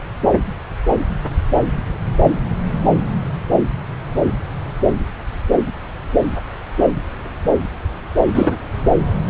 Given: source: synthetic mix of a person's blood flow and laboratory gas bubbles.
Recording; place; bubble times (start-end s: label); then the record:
Doppler ultrasound of blood flow; subclavian vein
8.35-8.56 s: bubbles
From the record:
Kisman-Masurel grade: 113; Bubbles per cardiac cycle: 1 to 2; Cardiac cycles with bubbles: 1 to 10%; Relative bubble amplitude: loud (0.450 to 0.775); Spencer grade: 1 (occasional bubble signal discernible with the cardiac motion signal, with majority of cardiac periods free of bubbles); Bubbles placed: anywhere in the cardiac cycle